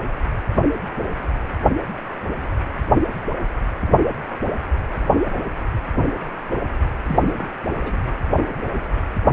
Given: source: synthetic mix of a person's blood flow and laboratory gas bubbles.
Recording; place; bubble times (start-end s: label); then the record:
Doppler ultrasound of blood flow; precordium
7.03-7.49 s: bubbles
7.80-8.02 s: bubbles
From the record:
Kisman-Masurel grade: 211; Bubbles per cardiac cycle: several, 3 to 8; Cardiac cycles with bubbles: 1 to 10%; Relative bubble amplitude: barely perceptible (0.100 to 0.250); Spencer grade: 1 (occasional bubble signal discernible with the cardiac motion signal, with majority of cardiac periods free of bubbles); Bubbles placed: anywhere in the cardiac cycle